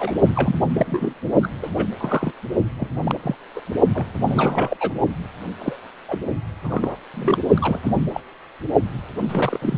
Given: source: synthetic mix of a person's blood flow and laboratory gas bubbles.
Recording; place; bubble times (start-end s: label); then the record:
Doppler ultrasound of blood flow; precordium
0.00-0.11 s: bubbles
0.35-0.58 s: bubbles
0.70-1.14 s: bubbles
1.42-1.48 s: bubbles
1.62-1.69 s: bubbles
1.73-1.89 s: bubbles
2.00-2.31 s: bubbles
2.77-2.92 s: bubbles
3.02-3.20 s: bubbles
3.23-3.35 s: bubbles
3.56-3.61 s: bubbles
3.94-4.06 s: bubbles
4.27-4.77 s: bubbles
4.80-4.93 s: bubbles
5.58-5.76 s: bubbles
6.08-6.18 s: bubbles
6.64-6.97 s: bubbles
7.14-7.38 s: bubbles
7.57-7.80 s: bubbles
7.83-7.93 s: bubbles
8.13-8.21 s: bubbles
9.29-9.78 s: bubbles
From the record:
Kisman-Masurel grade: 242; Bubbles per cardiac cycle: several, 3 to 8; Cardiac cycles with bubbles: 100%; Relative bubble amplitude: moderate (0.250 to 0.450); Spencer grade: 3 (all of the cardiac periods contain showers or single bubble signals, but not dominating or overriding the cardiac motion signals); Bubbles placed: only in the low amplitude regions of the cardiac cycle